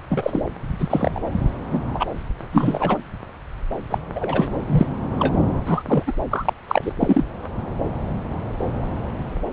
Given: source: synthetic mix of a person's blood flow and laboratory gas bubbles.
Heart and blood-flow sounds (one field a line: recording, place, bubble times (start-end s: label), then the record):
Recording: Doppler ultrasound of blood flow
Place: subclavian vein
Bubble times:
0.10-0.42 s: bubbles
0.78-1.22 s: bubbles
1.71-1.80 s: bubbles
1.95-2.05 s: bubbles
2.51-2.97 s: bubbles
3.90-3.98 s: bubbles
4.15-4.50 s: bubbles
4.67-4.87 s: bubbles
5.19-5.34 s: bubbles
5.66-5.83 s: bubbles
5.85-6.03 s: bubbles
6.07-6.12 s: bubbles
6.31-6.53 s: bubbles
6.67-6.92 s: bubbles
7.00-7.24 s: bubbles
From the record:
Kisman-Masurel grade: 233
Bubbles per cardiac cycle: several, 3 to 8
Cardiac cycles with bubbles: 50 to 99%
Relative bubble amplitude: loud (0.450 to 0.775)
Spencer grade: 3 (all of the cardiac periods contain showers or single bubble signals, but not dominating or overriding the cardiac motion signals)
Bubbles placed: anywhere in the cardiac cycle